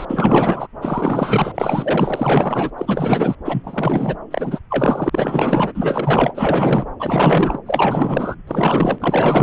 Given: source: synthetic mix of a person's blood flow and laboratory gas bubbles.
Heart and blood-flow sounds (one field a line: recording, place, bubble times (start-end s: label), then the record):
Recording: Doppler ultrasound of blood flow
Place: subclavian vein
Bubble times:
0.00-0.05 s: bubbles
0.09-0.68 s: bubbles
0.81-1.52 s: bubbles
1.54-2.71 s: bubbles
2.78-3.35 s: bubbles
3.45-4.17 s: bubbles
4.30-4.60 s: bubbles
4.70-5.72 s: bubbles
5.75-6.86 s: bubbles
6.99-7.59 s: bubbles
7.65-8.35 s: bubbles
8.47-9.43 s: bubbles
From the record:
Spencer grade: 4 (maximum detectable bubble signal sounding continuously throughout systole and diastole of every cardiac period, and overriding the amplitude of the normal cardiac signals)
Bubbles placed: anywhere in the cardiac cycle